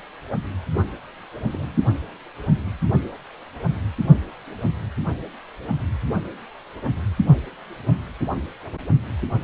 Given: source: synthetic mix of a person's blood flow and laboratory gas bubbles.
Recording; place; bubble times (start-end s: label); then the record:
Doppler ultrasound of blood flow; precordium
1.51-1.78 s: bubbles
From the record:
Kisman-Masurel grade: 111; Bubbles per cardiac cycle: 1 to 2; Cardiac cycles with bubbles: 1 to 10%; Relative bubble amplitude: barely perceptible (0.100 to 0.250); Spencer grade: 1 (occasional bubble signal discernible with the cardiac motion signal, with majority of cardiac periods free of bubbles); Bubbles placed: only in the low amplitude regions of the cardiac cycle